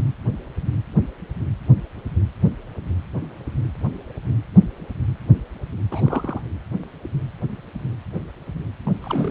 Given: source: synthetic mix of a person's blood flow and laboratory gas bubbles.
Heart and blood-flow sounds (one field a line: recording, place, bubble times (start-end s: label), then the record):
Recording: Doppler ultrasound of blood flow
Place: precordium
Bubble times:
5.91-6.42 s: bubbles
8.83-8.94 s: bubbles
9.01-9.31 s: bubbles
From the record:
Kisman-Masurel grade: 221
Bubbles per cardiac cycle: several, 3 to 8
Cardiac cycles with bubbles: 10 to 50%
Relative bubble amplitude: barely perceptible (0.100 to 0.250)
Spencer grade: 2 (many but less than half of the cardiac periods contain bubble signals, singularly or in groups)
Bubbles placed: anywhere in the cardiac cycle